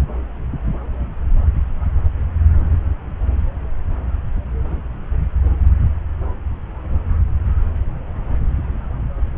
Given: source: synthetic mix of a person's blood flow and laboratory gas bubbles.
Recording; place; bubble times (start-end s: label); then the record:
Doppler ultrasound of blood flow; subclavian vein
no bubbles
From the record:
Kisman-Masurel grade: 000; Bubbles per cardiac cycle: 0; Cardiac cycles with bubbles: 0%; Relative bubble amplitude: no bubbles discernible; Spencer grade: 0 (complete lack of bubble signals)